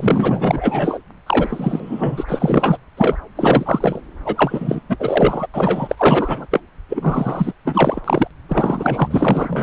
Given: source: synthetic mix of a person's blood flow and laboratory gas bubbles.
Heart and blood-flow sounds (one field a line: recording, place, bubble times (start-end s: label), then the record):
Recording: Doppler ultrasound of blood flow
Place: subclavian vein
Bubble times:
0.00-0.98 s: bubbles
1.26-2.25 s: bubbles
2.27-2.77 s: bubbles
2.97-3.17 s: bubbles
3.35-4.02 s: bubbles
4.25-4.81 s: bubbles
4.89-5.48 s: bubbles
5.54-6.46 s: bubbles
6.51-6.61 s: bubbles
6.89-7.53 s: bubbles
7.65-8.01 s: bubbles
8.04-8.28 s: bubbles
8.49-9.63 s: bubbles
From the record:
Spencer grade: 4 (maximum detectable bubble signal sounding continuously throughout systole and diastole of every cardiac period, and overriding the amplitude of the normal cardiac signals)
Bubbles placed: anywhere in the cardiac cycle